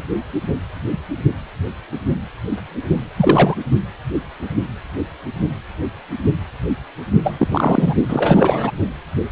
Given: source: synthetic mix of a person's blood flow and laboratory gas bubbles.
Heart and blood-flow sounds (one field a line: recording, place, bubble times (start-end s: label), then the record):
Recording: Doppler ultrasound of blood flow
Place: precordium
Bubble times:
3.17-3.55 s: bubbles
7.23-7.94 s: bubbles
8.08-8.71 s: bubbles
From the record:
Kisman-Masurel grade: 223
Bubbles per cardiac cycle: several, 3 to 8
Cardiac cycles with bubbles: 10 to 50%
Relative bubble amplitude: loud (0.450 to 0.775)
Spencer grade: 2 (many but less than half of the cardiac periods contain bubble signals, singularly or in groups)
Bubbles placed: only in the low amplitude regions of the cardiac cycle